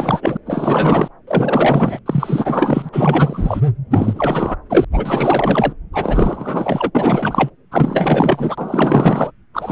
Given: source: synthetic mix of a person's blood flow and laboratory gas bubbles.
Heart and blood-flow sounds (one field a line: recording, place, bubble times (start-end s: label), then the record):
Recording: Doppler ultrasound of blood flow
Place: subclavian vein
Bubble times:
0.00-0.37 s: bubbles
0.46-1.08 s: bubbles
1.27-1.99 s: bubbles
2.06-2.89 s: bubbles
2.93-3.61 s: bubbles
3.90-4.56 s: bubbles
4.70-4.84 s: bubbles
4.92-5.73 s: bubbles
5.93-6.91 s: bubbles
6.95-7.50 s: bubbles
7.71-9.31 s: bubbles
9.54-9.72 s: bubbles
From the record:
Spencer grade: 4 (maximum detectable bubble signal sounding continuously throughout systole and diastole of every cardiac period, and overriding the amplitude of the normal cardiac signals)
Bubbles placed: anywhere in the cardiac cycle